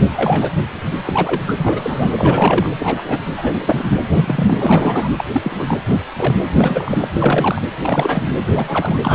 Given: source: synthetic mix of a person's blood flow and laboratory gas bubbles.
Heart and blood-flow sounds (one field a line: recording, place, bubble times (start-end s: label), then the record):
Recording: Doppler ultrasound of blood flow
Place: precordium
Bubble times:
0.14-0.52 s: bubbles
1.04-1.42 s: bubbles
1.47-2.12 s: bubbles
2.16-2.70 s: bubbles
2.78-3.02 s: bubbles
3.06-3.20 s: bubbles
3.37-3.85 s: bubbles
4.12-5.09 s: bubbles
5.17-5.25 s: bubbles
5.32-5.75 s: bubbles
5.87-6.03 s: bubbles
6.16-6.35 s: bubbles
6.50-7.07 s: bubbles
7.11-7.62 s: bubbles
7.82-8.33 s: bubbles
8.54-8.98 s: bubbles
9.03-9.15 s: bubbles
From the record:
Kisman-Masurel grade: 242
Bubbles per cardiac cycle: several, 3 to 8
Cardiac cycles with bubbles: 100%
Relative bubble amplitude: moderate (0.250 to 0.450)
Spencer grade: 3 (all of the cardiac periods contain showers or single bubble signals, but not dominating or overriding the cardiac motion signals)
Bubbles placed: anywhere in the cardiac cycle